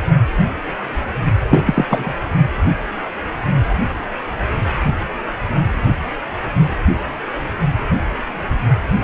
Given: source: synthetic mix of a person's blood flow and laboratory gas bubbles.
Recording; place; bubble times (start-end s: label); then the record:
Doppler ultrasound of blood flow; precordium
1.48-1.85 s: bubbles
1.89-2.14 s: bubbles
From the record:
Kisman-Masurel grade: 213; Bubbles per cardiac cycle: several, 3 to 8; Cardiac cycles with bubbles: 1 to 10%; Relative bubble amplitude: loud (0.450 to 0.775); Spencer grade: 1 (occasional bubble signal discernible with the cardiac motion signal, with majority of cardiac periods free of bubbles); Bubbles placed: only in the low amplitude regions of the cardiac cycle